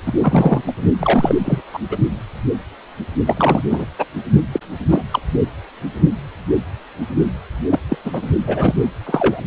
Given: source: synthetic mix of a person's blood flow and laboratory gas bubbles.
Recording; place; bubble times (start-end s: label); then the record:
Doppler ultrasound of blood flow; precordium
0.05-0.12 s: bubbles
0.18-0.61 s: bubbles
0.67-0.71 s: bubbles
0.99-1.35 s: bubbles
1.45-1.60 s: bubbles
1.73-1.79 s: bubbles
1.91-1.98 s: bubbles
3.27-3.62 s: bubbles
3.67-3.85 s: bubbles
3.98-4.05 s: bubbles
4.52-4.60 s: bubbles
4.90-5.04 s: bubbles
5.11-5.20 s: bubbles
7.69-7.80 s: bubbles
7.88-7.97 s: bubbles
8.04-8.22 s: bubbles
8.47-8.74 s: bubbles
9.06-9.41 s: bubbles
From the record:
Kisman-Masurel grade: 233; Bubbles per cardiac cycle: several, 3 to 8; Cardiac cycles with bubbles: 50 to 99%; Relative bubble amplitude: loud (0.450 to 0.775); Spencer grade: 3 (all of the cardiac periods contain showers or single bubble signals, but not dominating or overriding the cardiac motion signals); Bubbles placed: only in the low amplitude regions of the cardiac cycle